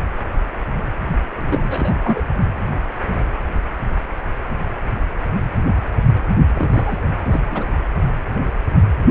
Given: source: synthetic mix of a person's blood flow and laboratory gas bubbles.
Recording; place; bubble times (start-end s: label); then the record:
Doppler ultrasound of blood flow; precordium
1.36-1.95 s: bubbles
2.04-2.21 s: bubbles
6.55-7.00 s: bubbles
7.17-7.40 s: bubbles
7.50-7.67 s: bubbles
From the record:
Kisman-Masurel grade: 222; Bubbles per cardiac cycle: several, 3 to 8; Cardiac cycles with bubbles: 10 to 50%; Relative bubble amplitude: moderate (0.250 to 0.450); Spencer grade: 2 (many but less than half of the cardiac periods contain bubble signals, singularly or in groups); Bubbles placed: only in the low amplitude regions of the cardiac cycle